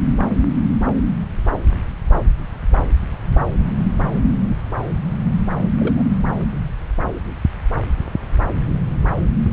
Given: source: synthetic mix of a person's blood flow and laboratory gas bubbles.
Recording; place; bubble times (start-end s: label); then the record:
Doppler ultrasound of blood flow; subclavian vein
5.79-6.03 s: bubbles
From the record:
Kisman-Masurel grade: 111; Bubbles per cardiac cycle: 1 to 2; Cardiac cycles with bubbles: 1 to 10%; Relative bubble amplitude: barely perceptible (0.100 to 0.250); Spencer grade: 1 (occasional bubble signal discernible with the cardiac motion signal, with majority of cardiac periods free of bubbles); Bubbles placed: anywhere in the cardiac cycle